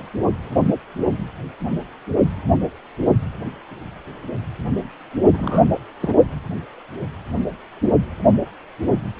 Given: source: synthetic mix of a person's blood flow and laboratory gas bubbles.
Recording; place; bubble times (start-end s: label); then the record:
Doppler ultrasound of blood flow; precordium
5.33-5.73 s: bubbles
6.00-6.14 s: bubbles
From the record:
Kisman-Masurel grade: 221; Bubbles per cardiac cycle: several, 3 to 8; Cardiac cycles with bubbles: 10 to 50%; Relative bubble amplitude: barely perceptible (0.100 to 0.250); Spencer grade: 2 (many but less than half of the cardiac periods contain bubble signals, singularly or in groups); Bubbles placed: only in the low amplitude regions of the cardiac cycle